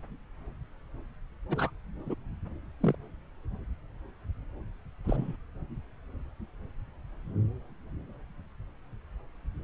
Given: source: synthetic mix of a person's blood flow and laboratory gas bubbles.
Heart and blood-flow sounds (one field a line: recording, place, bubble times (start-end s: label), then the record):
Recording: Doppler ultrasound of blood flow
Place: subclavian vein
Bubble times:
1.49-1.70 s: bubbles
2.06-2.15 s: bubbles
2.81-2.96 s: bubbles
5.04-5.36 s: bubbles
From the record:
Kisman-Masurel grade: 121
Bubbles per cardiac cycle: 1 to 2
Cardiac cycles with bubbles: 10 to 50%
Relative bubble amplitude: barely perceptible (0.100 to 0.250)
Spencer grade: 2 (many but less than half of the cardiac periods contain bubble signals, singularly or in groups)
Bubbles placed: anywhere in the cardiac cycle